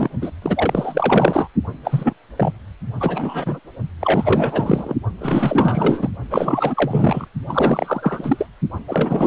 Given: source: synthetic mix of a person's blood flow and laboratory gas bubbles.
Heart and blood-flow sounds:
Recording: Doppler ultrasound of blood flow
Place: precordium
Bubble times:
0.00-0.08 s: bubbles
0.21-0.30 s: bubbles
0.42-1.48 s: bubbles
1.84-2.13 s: bubbles
2.37-2.52 s: bubbles
3.00-3.59 s: bubbles
4.00-4.95 s: bubbles
5.18-6.09 s: bubbles
6.30-7.28 s: bubbles
7.47-8.46 s: bubbles
8.87-9.27 s: bubbles
From the record:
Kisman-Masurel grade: 444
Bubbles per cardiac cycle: continuous sound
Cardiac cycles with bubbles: 100%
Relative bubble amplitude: maximal (0.775 to 0.999)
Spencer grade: 4 (maximum detectable bubble signal sounding continuously throughout systole and diastole of every cardiac period, and overriding the amplitude of the normal cardiac signals)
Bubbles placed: only in the low amplitude regions of the cardiac cycle

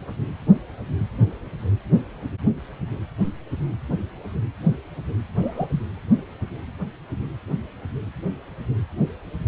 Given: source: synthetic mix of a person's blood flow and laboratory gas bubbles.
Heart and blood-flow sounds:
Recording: Doppler ultrasound of blood flow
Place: precordium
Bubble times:
5.35-5.67 s: bubbles
5.72-5.81 s: bubbles
From the record:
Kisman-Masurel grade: 121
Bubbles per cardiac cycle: 1 to 2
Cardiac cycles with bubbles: 10 to 50%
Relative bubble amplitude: barely perceptible (0.100 to 0.250)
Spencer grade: 2 (many but less than half of the cardiac periods contain bubble signals, singularly or in groups)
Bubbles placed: anywhere in the cardiac cycle

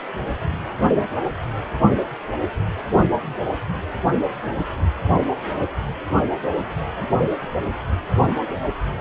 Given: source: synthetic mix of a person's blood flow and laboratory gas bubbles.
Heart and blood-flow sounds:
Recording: Doppler ultrasound of blood flow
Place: precordium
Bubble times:
7.10-7.35 s: bubbles
From the record:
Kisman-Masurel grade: 111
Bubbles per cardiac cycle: 1 to 2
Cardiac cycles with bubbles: 1 to 10%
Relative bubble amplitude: barely perceptible (0.100 to 0.250)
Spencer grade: 1 (occasional bubble signal discernible with the cardiac motion signal, with majority of cardiac periods free of bubbles)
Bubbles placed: anywhere in the cardiac cycle

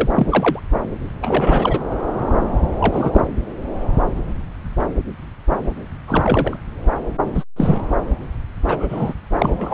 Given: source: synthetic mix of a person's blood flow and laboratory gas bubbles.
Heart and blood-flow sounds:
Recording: Doppler ultrasound of blood flow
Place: subclavian vein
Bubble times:
0.00-0.11 s: bubbles
0.15-0.59 s: bubbles
1.21-1.79 s: bubbles
2.80-3.21 s: bubbles
6.08-6.57 s: bubbles
7.35-7.44 s: bubbles
7.56-7.80 s: bubbles
8.66-9.13 s: bubbles
9.38-9.74 s: bubbles
From the record:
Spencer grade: 3 (all of the cardiac periods contain showers or single bubble signals, but not dominating or overriding the cardiac motion signals)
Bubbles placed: anywhere in the cardiac cycle

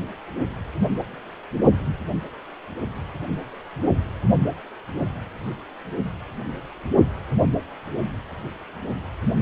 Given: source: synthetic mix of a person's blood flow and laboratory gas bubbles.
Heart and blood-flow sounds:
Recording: Doppler ultrasound of blood flow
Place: precordium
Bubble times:
no bubbles
From the record:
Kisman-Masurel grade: 000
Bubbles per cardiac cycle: 0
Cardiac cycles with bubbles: 0%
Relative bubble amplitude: no bubbles discernible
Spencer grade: 0 (complete lack of bubble signals)

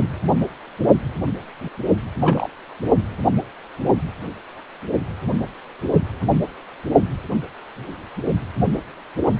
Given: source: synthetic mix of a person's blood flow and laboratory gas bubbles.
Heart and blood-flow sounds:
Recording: Doppler ultrasound of blood flow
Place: precordium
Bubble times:
2.19-2.50 s: bubbles
From the record:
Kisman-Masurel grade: 222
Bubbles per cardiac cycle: several, 3 to 8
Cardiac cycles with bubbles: 10 to 50%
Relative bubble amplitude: moderate (0.250 to 0.450)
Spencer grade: 2 (many but less than half of the cardiac periods contain bubble signals, singularly or in groups)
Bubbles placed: only in the low amplitude regions of the cardiac cycle

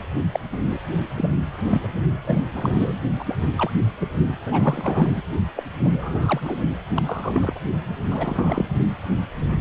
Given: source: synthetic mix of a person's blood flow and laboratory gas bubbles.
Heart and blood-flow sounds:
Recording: Doppler ultrasound of blood flow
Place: precordium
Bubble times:
0.32-0.40 s: bubbles
0.52-0.57 s: bubbles
0.70-0.81 s: bubbles
1.17-1.31 s: bubbles
1.69-1.90 s: bubbles
2.25-2.45 s: bubbles
2.55-3.00 s: bubbles
3.19-3.35 s: bubbles
3.58-3.70 s: bubbles
4.00-4.06 s: bubbles
4.46-5.22 s: bubbles
5.56-5.63 s: bubbles
5.80-6.56 s: bubbles
6.96-7.02 s: bubbles
7.06-7.59 s: bubbles
8.09-8.64 s: bubbles
From the record:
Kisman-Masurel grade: 232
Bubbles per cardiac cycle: several, 3 to 8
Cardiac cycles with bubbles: 50 to 99%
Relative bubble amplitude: moderate (0.250 to 0.450)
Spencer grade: 3 (all of the cardiac periods contain showers or single bubble signals, but not dominating or overriding the cardiac motion signals)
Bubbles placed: only in the low amplitude regions of the cardiac cycle

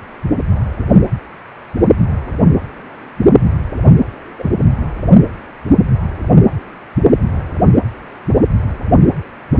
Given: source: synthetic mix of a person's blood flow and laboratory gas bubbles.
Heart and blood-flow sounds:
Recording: Doppler ultrasound of blood flow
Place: precordium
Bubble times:
4.38-4.50 s: bubbles
From the record:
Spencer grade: 1 (occasional bubble signal discernible with the cardiac motion signal, with majority of cardiac periods free of bubbles)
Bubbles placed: anywhere in the cardiac cycle

